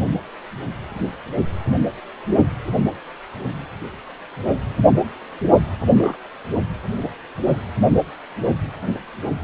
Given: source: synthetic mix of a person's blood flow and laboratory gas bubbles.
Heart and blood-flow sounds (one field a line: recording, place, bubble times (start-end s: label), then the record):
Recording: Doppler ultrasound of blood flow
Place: precordium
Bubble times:
5.79-6.17 s: bubbles
From the record:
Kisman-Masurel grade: 123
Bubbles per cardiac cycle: 1 to 2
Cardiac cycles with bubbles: 10 to 50%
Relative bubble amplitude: loud (0.450 to 0.775)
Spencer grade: 2 (many but less than half of the cardiac periods contain bubble signals, singularly or in groups)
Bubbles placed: only in the low amplitude regions of the cardiac cycle